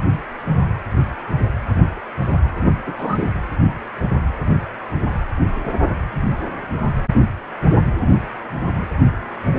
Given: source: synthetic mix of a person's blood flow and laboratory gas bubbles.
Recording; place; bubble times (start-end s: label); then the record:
Doppler ultrasound of blood flow; precordium
2.62-2.67 s: bubbles
2.86-2.94 s: bubbles
2.96-3.33 s: bubbles
From the record:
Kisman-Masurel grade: 212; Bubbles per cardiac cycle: several, 3 to 8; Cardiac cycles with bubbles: 1 to 10%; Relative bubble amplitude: moderate (0.250 to 0.450); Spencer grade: 1 (occasional bubble signal discernible with the cardiac motion signal, with majority of cardiac periods free of bubbles); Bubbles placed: anywhere in the cardiac cycle